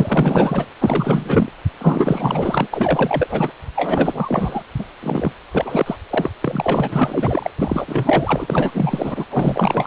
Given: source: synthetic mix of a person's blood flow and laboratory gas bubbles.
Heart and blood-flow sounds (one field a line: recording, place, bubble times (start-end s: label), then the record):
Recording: Doppler ultrasound of blood flow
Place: precordium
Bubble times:
0.00-0.66 s: bubbles
0.80-1.48 s: bubbles
1.80-2.67 s: bubbles
2.73-3.52 s: bubbles
3.75-4.62 s: bubbles
4.78-4.85 s: bubbles
5.02-5.32 s: bubbles
5.51-5.96 s: bubbles
6.09-6.30 s: bubbles
6.41-7.50 s: bubbles
7.58-9.26 s: bubbles
9.29-9.87 s: bubbles
From the record:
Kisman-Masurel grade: 444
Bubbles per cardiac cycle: continuous sound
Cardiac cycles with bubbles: 100%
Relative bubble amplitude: maximal (0.775 to 0.999)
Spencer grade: 4 (maximum detectable bubble signal sounding continuously throughout systole and diastole of every cardiac period, and overriding the amplitude of the normal cardiac signals)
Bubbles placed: anywhere in the cardiac cycle